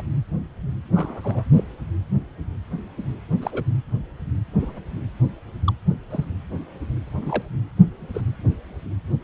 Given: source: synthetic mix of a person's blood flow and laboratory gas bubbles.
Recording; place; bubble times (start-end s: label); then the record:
Doppler ultrasound of blood flow; precordium
0.94-1.21 s: bubbles
1.24-1.44 s: bubbles
1.56-1.64 s: bubbles
3.42-3.64 s: bubbles
4.58-4.80 s: bubbles
5.67-5.73 s: bubbles
6.10-6.25 s: bubbles
7.21-7.42 s: bubbles
8.13-8.21 s: bubbles
From the record:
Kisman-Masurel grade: 121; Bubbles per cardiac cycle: 1 to 2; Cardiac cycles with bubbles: 10 to 50%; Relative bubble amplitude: barely perceptible (0.100 to 0.250); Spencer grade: 2 (many but less than half of the cardiac periods contain bubble signals, singularly or in groups); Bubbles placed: anywhere in the cardiac cycle